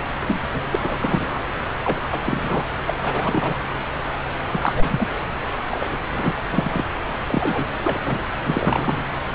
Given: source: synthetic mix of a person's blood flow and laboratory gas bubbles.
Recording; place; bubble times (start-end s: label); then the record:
Doppler ultrasound of blood flow; subclavian vein
0.26-0.40 s: bubbles
0.53-0.62 s: bubbles
0.71-1.44 s: bubbles
1.84-2.00 s: bubbles
2.12-2.18 s: bubbles
2.25-2.65 s: bubbles
2.87-2.95 s: bubbles
3.02-3.58 s: bubbles
4.49-5.09 s: bubbles
5.69-5.97 s: bubbles
6.12-6.33 s: bubbles
6.50-6.85 s: bubbles
7.26-7.68 s: bubbles
7.84-7.98 s: bubbles
8.04-8.22 s: bubbles
8.43-9.04 s: bubbles
From the record:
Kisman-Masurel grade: 242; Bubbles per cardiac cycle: several, 3 to 8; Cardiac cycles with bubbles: 100%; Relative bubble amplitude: moderate (0.250 to 0.450); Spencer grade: 3 (all of the cardiac periods contain showers or single bubble signals, but not dominating or overriding the cardiac motion signals); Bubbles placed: anywhere in the cardiac cycle